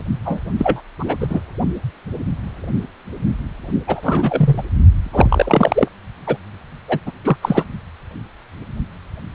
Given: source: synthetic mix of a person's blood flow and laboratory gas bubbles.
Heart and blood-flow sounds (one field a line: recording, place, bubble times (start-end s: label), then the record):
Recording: Doppler ultrasound of blood flow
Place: precordium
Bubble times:
0.25-0.42 s: bubbles
0.58-0.81 s: bubbles
0.99-1.16 s: bubbles
1.20-1.40 s: bubbles
3.87-4.64 s: bubbles
5.02-5.88 s: bubbles
6.26-6.37 s: bubbles
6.88-6.99 s: bubbles
7.06-7.12 s: bubbles
7.23-7.37 s: bubbles
7.42-7.64 s: bubbles
From the record:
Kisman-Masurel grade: 233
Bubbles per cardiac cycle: several, 3 to 8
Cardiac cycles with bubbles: 50 to 99%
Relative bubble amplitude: loud (0.450 to 0.775)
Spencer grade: 3 (all of the cardiac periods contain showers or single bubble signals, but not dominating or overriding the cardiac motion signals)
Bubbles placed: only in the low amplitude regions of the cardiac cycle